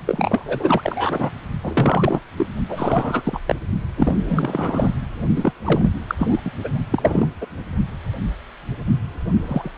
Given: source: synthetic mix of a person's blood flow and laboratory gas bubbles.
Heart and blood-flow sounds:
Doppler ultrasound of blood flow; precordium
0.07-1.30 s: bubbles
1.63-2.20 s: bubbles
2.38-2.46 s: bubbles
2.69-3.40 s: bubbles
3.46-3.55 s: bubbles
3.97-4.94 s: bubbles
5.36-5.52 s: bubbles
5.65-5.90 s: bubbles
6.08-6.15 s: bubbles
6.19-6.40 s: bubbles
6.45-6.51 s: bubbles
6.64-6.70 s: bubbles
6.91-7.28 s: bubbles
7.41-7.46 s: bubbles
9.43-9.71 s: bubbles
From the record:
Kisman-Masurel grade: 332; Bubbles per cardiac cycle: rolling drumbeat, 9 or more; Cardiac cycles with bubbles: 50 to 99%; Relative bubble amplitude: moderate (0.250 to 0.450); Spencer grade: 3 (all of the cardiac periods contain showers or single bubble signals, but not dominating or overriding the cardiac motion signals); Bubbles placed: only in the low amplitude regions of the cardiac cycle

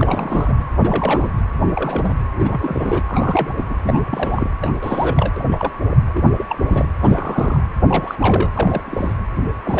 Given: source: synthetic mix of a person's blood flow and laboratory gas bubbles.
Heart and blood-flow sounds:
Doppler ultrasound of blood flow; precordium
0.00-0.57 s: bubbles
0.79-1.31 s: bubbles
1.75-2.19 s: bubbles
2.35-3.03 s: bubbles
3.07-3.53 s: bubbles
3.57-3.66 s: bubbles
3.69-3.78 s: bubbles
3.82-4.49 s: bubbles
4.60-4.73 s: bubbles
4.81-5.33 s: bubbles
5.36-5.43 s: bubbles
5.51-5.72 s: bubbles
5.91-5.96 s: bubbles
6.14-6.33 s: bubbles
6.38-6.46 s: bubbles
6.49-6.58 s: bubbles
6.62-6.88 s: bubbles
7.03-7.62 s: bubbles
7.88-8.16 s: bubbles
8.19-8.50 s: bubbles
8.56-8.82 s: bubbles
8.86-9.14 s: bubbles
9.64-9.80 s: bubbles
From the record:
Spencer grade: 3 (all of the cardiac periods contain showers or single bubble signals, but not dominating or overriding the cardiac motion signals); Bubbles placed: anywhere in the cardiac cycle

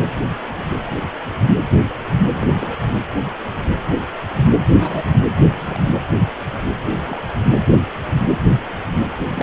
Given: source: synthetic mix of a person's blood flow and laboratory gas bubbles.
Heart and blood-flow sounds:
Doppler ultrasound of blood flow; precordium
2.31-2.83 s: bubbles
4.75-5.25 s: bubbles
5.46-5.87 s: bubbles
6.83-7.21 s: bubbles
9.35-9.42 s: bubbles
From the record:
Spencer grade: 2 (many but less than half of the cardiac periods contain bubble signals, singularly or in groups); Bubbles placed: anywhere in the cardiac cycle

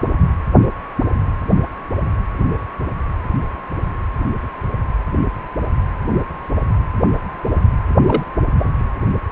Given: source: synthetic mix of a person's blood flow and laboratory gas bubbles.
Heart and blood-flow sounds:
Doppler ultrasound of blood flow; precordium
8.06-8.23 s: bubbles
From the record:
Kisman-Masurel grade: 112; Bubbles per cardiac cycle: 1 to 2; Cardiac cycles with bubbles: 1 to 10%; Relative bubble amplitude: moderate (0.250 to 0.450); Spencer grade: 1 (occasional bubble signal discernible with the cardiac motion signal, with majority of cardiac periods free of bubbles); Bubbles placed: anywhere in the cardiac cycle

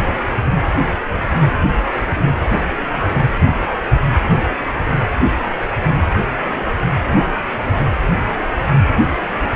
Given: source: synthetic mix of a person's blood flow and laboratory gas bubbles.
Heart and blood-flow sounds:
Doppler ultrasound of blood flow; precordium
0.00-0.17 s: bubbles
From the record:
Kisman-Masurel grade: 122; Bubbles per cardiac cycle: 1 to 2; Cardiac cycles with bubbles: 10 to 50%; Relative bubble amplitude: moderate (0.250 to 0.450); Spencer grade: 2 (many but less than half of the cardiac periods contain bubble signals, singularly or in groups); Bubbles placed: anywhere in the cardiac cycle

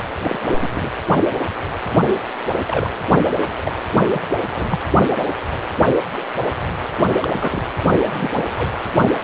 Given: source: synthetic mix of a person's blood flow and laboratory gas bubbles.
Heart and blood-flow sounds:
Doppler ultrasound of blood flow; precordium
0.26-0.68 s: bubbles
0.75-0.89 s: bubbles
2.67-2.90 s: bubbles
3.24-3.31 s: bubbles
3.64-3.72 s: bubbles
3.91-4.20 s: bubbles
4.37-4.42 s: bubbles
4.56-4.79 s: bubbles
7.21-7.28 s: bubbles
7.32-7.62 s: bubbles
7.96-8.13 s: bubbles
8.16-8.44 s: bubbles
8.57-8.68 s: bubbles
9.02-9.12 s: bubbles
From the record:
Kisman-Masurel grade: 232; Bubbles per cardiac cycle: several, 3 to 8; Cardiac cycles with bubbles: 50 to 99%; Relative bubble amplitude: moderate (0.250 to 0.450); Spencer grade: 3 (all of the cardiac periods contain showers or single bubble signals, but not dominating or overriding the cardiac motion signals); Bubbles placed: anywhere in the cardiac cycle

